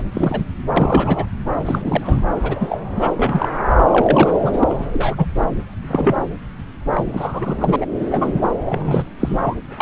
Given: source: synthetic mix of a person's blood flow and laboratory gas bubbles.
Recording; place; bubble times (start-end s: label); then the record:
Doppler ultrasound of blood flow; subclavian vein
0.00-0.03 s: bubbles
0.12-0.43 s: bubbles
0.76-1.25 s: bubbles
1.66-2.21 s: bubbles
2.43-2.83 s: bubbles
2.96-3.11 s: bubbles
3.17-3.48 s: bubbles
3.91-4.75 s: bubbles
4.92-5.15 s: bubbles
5.17-5.25 s: bubbles
5.87-6.16 s: bubbles
6.80-7.76 s: bubbles
7.80-7.85 s: bubbles
8.11-8.33 s: bubbles
8.66-9.06 s: bubbles
9.20-9.56 s: bubbles
9.78-9.82 s: bubbles
From the record:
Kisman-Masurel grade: 242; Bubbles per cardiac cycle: several, 3 to 8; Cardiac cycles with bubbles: 100%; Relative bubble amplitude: moderate (0.250 to 0.450); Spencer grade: 3 (all of the cardiac periods contain showers or single bubble signals, but not dominating or overriding the cardiac motion signals); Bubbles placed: anywhere in the cardiac cycle